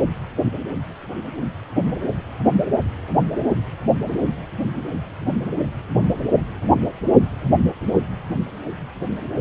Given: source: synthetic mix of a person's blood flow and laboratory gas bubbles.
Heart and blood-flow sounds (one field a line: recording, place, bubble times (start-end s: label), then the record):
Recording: Doppler ultrasound of blood flow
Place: precordium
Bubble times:
no bubbles
From the record:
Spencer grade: 0 (complete lack of bubble signals)